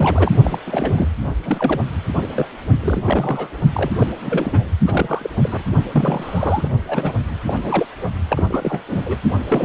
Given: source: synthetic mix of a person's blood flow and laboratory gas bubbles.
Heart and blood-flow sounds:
Doppler ultrasound of blood flow; precordium
0.00-0.32 s: bubbles
0.44-0.59 s: bubbles
0.66-1.08 s: bubbles
1.42-1.82 s: bubbles
2.22-2.28 s: bubbles
2.33-2.47 s: bubbles
2.81-3.56 s: bubbles
3.73-3.92 s: bubbles
3.99-4.07 s: bubbles
4.21-4.69 s: bubbles
4.87-5.30 s: bubbles
5.42-5.62 s: bubbles
5.92-6.69 s: bubbles
6.87-7.13 s: bubbles
7.43-7.60 s: bubbles
7.63-7.86 s: bubbles
8.29-8.44 s: bubbles
8.48-8.83 s: bubbles
8.89-9.17 s: bubbles
9.44-9.64 s: bubbles
From the record:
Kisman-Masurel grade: 342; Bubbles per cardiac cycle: rolling drumbeat, 9 or more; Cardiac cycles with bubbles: 100%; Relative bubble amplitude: moderate (0.250 to 0.450); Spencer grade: 3 (all of the cardiac periods contain showers or single bubble signals, but not dominating or overriding the cardiac motion signals); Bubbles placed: only in the low amplitude regions of the cardiac cycle

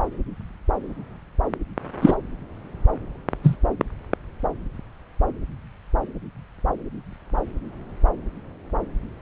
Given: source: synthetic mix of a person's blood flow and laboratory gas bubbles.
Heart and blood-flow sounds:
Doppler ultrasound of blood flow; subclavian vein
2.01-2.16 s: bubbles
3.43-3.56 s: bubbles
From the record:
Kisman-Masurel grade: 113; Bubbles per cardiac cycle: 1 to 2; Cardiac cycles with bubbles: 1 to 10%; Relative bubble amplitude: loud (0.450 to 0.775); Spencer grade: 1 (occasional bubble signal discernible with the cardiac motion signal, with majority of cardiac periods free of bubbles); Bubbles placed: anywhere in the cardiac cycle

